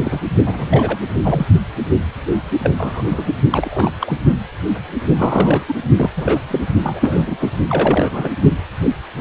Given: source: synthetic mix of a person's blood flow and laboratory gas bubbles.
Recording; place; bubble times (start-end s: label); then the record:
Doppler ultrasound of blood flow; precordium
0.00-0.21 s: bubbles
0.45-0.98 s: bubbles
1.22-1.46 s: bubbles
2.62-2.71 s: bubbles
2.77-3.32 s: bubbles
3.50-3.90 s: bubbles
4.00-4.18 s: bubbles
5.16-5.64 s: bubbles
5.68-5.75 s: bubbles
5.97-6.10 s: bubbles
6.16-6.40 s: bubbles
6.50-6.61 s: bubbles
6.83-7.37 s: bubbles
7.40-7.50 s: bubbles
7.67-8.30 s: bubbles
From the record:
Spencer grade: 3 (all of the cardiac periods contain showers or single bubble signals, but not dominating or overriding the cardiac motion signals); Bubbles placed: only in the low amplitude regions of the cardiac cycle